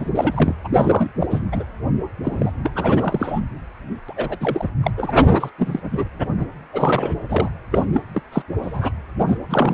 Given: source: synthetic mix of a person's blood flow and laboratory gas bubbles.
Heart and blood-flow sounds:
Doppler ultrasound of blood flow; precordium
0.00-0.11 s: bubbles
0.15-0.55 s: bubbles
0.64-0.68 s: bubbles
0.74-1.08 s: bubbles
1.19-1.26 s: bubbles
1.30-1.40 s: bubbles
1.52-1.64 s: bubbles
2.23-2.52 s: bubbles
2.63-3.40 s: bubbles
4.08-4.13 s: bubbles
4.17-4.36 s: bubbles
4.40-4.69 s: bubbles
4.82-4.91 s: bubbles
4.97-5.25 s: bubbles
5.33-5.50 s: bubbles
5.58-5.81 s: bubbles
5.91-6.04 s: bubbles
6.38-6.47 s: bubbles
6.73-7.16 s: bubbles
7.28-7.49 s: bubbles
7.71-7.85 s: bubbles
7.92-8.03 s: bubbles
8.14-8.23 s: bubbles
8.32-8.42 s: bubbles
8.62-8.92 s: bubbles
9.27-9.39 s: bubbles
9.50-9.74 s: bubbles
From the record:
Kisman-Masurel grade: 342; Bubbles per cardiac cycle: rolling drumbeat, 9 or more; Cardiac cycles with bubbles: 100%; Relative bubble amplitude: moderate (0.250 to 0.450); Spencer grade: 3 (all of the cardiac periods contain showers or single bubble signals, but not dominating or overriding the cardiac motion signals); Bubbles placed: anywhere in the cardiac cycle

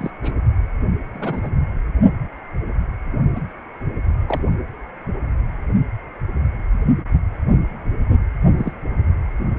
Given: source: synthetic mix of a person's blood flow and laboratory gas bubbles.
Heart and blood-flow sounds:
Doppler ultrasound of blood flow; precordium
0.00-0.10 s: bubbles
0.23-0.32 s: bubbles
1.13-1.50 s: bubbles
3.35-3.40 s: bubbles
4.28-4.42 s: bubbles
8.56-8.72 s: bubbles
From the record:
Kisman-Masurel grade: 122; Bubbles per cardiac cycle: 1 to 2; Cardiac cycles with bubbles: 10 to 50%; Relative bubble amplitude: moderate (0.250 to 0.450); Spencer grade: 2 (many but less than half of the cardiac periods contain bubble signals, singularly or in groups); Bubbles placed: only in the low amplitude regions of the cardiac cycle

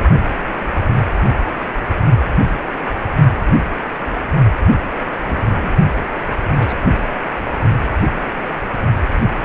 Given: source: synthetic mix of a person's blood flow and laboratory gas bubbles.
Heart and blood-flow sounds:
Doppler ultrasound of blood flow; precordium
5.26-5.70 s: bubbles
6.33-6.78 s: bubbles
8.14-8.26 s: bubbles
9.34-9.45 s: bubbles
From the record:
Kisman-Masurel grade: 121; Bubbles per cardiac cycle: 1 to 2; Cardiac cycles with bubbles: 10 to 50%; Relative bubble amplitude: barely perceptible (0.100 to 0.250); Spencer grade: 2 (many but less than half of the cardiac periods contain bubble signals, singularly or in groups); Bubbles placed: only in the low amplitude regions of the cardiac cycle

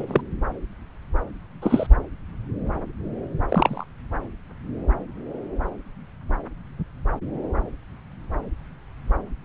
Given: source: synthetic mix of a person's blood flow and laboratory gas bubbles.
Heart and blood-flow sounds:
Doppler ultrasound of blood flow; subclavian vein
0.00-0.21 s: bubbles
1.61-1.87 s: bubbles
3.49-3.84 s: bubbles
From the record:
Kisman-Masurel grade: 122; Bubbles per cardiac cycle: 1 to 2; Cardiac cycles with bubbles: 10 to 50%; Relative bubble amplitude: moderate (0.250 to 0.450); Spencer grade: 2 (many but less than half of the cardiac periods contain bubble signals, singularly or in groups); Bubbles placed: anywhere in the cardiac cycle

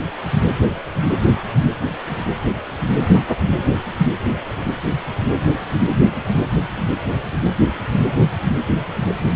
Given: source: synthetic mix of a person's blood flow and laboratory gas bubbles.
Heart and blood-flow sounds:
Doppler ultrasound of blood flow; precordium
no bubbles
From the record:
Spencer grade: 0 (complete lack of bubble signals)

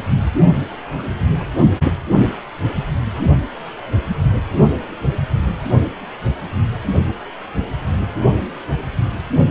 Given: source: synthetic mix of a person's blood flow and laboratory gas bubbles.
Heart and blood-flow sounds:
Doppler ultrasound of blood flow; precordium
0.98-1.02 s: bubbles
1.38-1.42 s: bubbles
From the record:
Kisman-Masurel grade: 121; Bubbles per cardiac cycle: 1 to 2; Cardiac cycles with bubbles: 10 to 50%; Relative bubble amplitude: barely perceptible (0.100 to 0.250); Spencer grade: 2 (many but less than half of the cardiac periods contain bubble signals, singularly or in groups); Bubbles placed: only in the low amplitude regions of the cardiac cycle

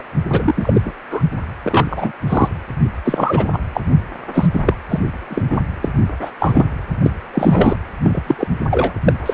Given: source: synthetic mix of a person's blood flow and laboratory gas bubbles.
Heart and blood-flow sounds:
Doppler ultrasound of blood flow; precordium
0.00-0.02 s: bubbles
0.32-0.54 s: bubbles
0.56-0.81 s: bubbles
0.85-0.94 s: bubbles
1.10-1.23 s: bubbles
1.62-2.12 s: bubbles
2.27-2.48 s: bubbles
3.04-3.49 s: bubbles
3.52-3.59 s: bubbles
3.73-3.81 s: bubbles
4.34-4.47 s: bubbles
4.53-4.74 s: bubbles
4.89-5.00 s: bubbles
5.29-5.60 s: bubbles
5.82-5.89 s: bubbles
6.21-6.31 s: bubbles
6.39-6.65 s: bubbles
7.03-7.12 s: bubbles
7.33-7.76 s: bubbles
8.03-8.21 s: bubbles
8.27-8.35 s: bubbles
8.38-8.47 s: bubbles
8.71-8.93 s: bubbles
9.05-9.13 s: bubbles
9.26-9.34 s: bubbles
From the record:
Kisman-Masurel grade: 243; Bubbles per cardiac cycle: several, 3 to 8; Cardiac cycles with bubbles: 100%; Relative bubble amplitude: loud (0.450 to 0.775); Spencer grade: 3 (all of the cardiac periods contain showers or single bubble signals, but not dominating or overriding the cardiac motion signals); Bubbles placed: anywhere in the cardiac cycle

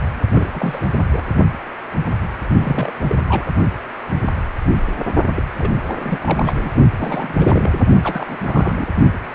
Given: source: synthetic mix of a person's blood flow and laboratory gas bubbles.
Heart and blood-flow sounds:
Doppler ultrasound of blood flow; precordium
0.35-0.50 s: bubbles
0.54-0.85 s: bubbles
1.13-1.22 s: bubbles
2.60-2.92 s: bubbles
3.07-3.15 s: bubbles
3.28-3.45 s: bubbles
5.35-5.42 s: bubbles
5.58-5.73 s: bubbles
5.87-5.95 s: bubbles
5.98-6.72 s: bubbles
6.97-7.86 s: bubbles
8.03-8.87 s: bubbles
From the record:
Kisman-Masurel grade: 332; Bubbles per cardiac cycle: rolling drumbeat, 9 or more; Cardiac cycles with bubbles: 50 to 99%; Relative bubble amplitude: moderate (0.250 to 0.450); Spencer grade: 3 (all of the cardiac periods contain showers or single bubble signals, but not dominating or overriding the cardiac motion signals); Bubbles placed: only in the low amplitude regions of the cardiac cycle

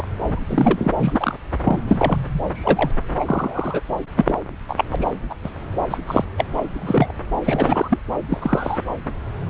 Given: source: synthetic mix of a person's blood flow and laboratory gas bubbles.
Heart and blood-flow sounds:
Doppler ultrasound of blood flow; subclavian vein
0.00-0.07 s: bubbles
0.28-0.40 s: bubbles
0.47-0.92 s: bubbles
0.99-1.35 s: bubbles
1.65-1.82 s: bubbles
1.87-2.17 s: bubbles
2.53-2.91 s: bubbles
3.19-3.81 s: bubbles
4.17-4.36 s: bubbles
4.68-4.84 s: bubbles
4.90-4.96 s: bubbles
4.99-5.12 s: bubbles
5.29-5.35 s: bubbles
5.43-5.50 s: bubbles
5.90-5.97 s: bubbles
6.07-6.25 s: bubbles
6.37-6.45 s: bubbles
6.56-6.63 s: bubbles
6.76-7.12 s: bubbles
7.45-7.99 s: bubbles
8.30-8.38 s: bubbles
8.40-8.79 s: bubbles
9.48-9.50 s: bubbles
From the record:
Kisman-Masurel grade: 242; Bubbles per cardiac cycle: several, 3 to 8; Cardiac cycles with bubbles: 100%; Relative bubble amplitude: moderate (0.250 to 0.450); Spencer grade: 3 (all of the cardiac periods contain showers or single bubble signals, but not dominating or overriding the cardiac motion signals); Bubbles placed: anywhere in the cardiac cycle

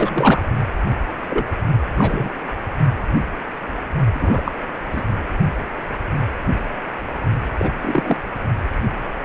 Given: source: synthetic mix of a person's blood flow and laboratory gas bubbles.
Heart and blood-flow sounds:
Doppler ultrasound of blood flow; precordium
0.00-0.42 s: bubbles
1.29-1.52 s: bubbles
1.95-2.30 s: bubbles
4.13-4.52 s: bubbles
4.92-5.03 s: bubbles
7.58-7.72 s: bubbles
7.81-8.16 s: bubbles
From the record:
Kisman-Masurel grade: 223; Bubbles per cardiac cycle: several, 3 to 8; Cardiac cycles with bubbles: 10 to 50%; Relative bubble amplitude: loud (0.450 to 0.775); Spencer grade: 2 (many but less than half of the cardiac periods contain bubble signals, singularly or in groups); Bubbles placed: only in the low amplitude regions of the cardiac cycle

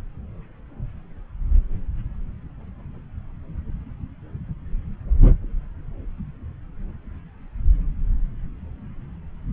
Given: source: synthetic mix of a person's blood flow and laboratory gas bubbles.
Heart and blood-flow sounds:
Doppler ultrasound of blood flow; subclavian vein
no bubbles
From the record:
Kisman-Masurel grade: 000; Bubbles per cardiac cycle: 0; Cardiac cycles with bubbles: 0%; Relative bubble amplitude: no bubbles discernible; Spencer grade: 0 (complete lack of bubble signals)

